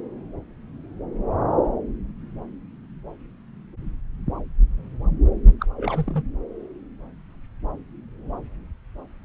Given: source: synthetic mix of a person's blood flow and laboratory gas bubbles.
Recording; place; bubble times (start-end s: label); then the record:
Doppler ultrasound of blood flow; subclavian vein
5.59-5.66 s: bubbles
5.76-6.23 s: bubbles
From the record:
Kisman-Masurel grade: 211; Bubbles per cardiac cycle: several, 3 to 8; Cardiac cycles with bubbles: 1 to 10%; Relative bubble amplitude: barely perceptible (0.100 to 0.250); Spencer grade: 1 (occasional bubble signal discernible with the cardiac motion signal, with majority of cardiac periods free of bubbles); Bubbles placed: anywhere in the cardiac cycle